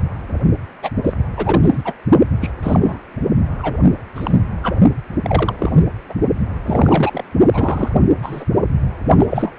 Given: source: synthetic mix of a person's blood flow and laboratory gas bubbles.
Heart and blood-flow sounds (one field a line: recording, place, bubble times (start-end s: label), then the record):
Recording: Doppler ultrasound of blood flow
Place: precordium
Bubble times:
0.82-0.91 s: bubbles
1.03-1.15 s: bubbles
1.36-1.94 s: bubbles
2.41-2.50 s: bubbles
2.62-3.00 s: bubbles
3.58-3.77 s: bubbles
4.15-4.40 s: bubbles
4.62-4.75 s: bubbles
5.22-5.55 s: bubbles
5.58-5.85 s: bubbles
6.09-6.15 s: bubbles
6.65-7.24 s: bubbles
7.53-8.01 s: bubbles
8.22-8.44 s: bubbles
9.16-9.26 s: bubbles
9.29-9.54 s: bubbles
From the record:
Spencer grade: 3 (all of the cardiac periods contain showers or single bubble signals, but not dominating or overriding the cardiac motion signals)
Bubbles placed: only in the low amplitude regions of the cardiac cycle